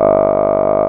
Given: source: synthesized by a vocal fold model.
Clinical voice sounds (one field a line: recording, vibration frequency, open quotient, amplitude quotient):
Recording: sustained vowel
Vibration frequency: 50 Hz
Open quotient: 0.1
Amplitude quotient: 1.1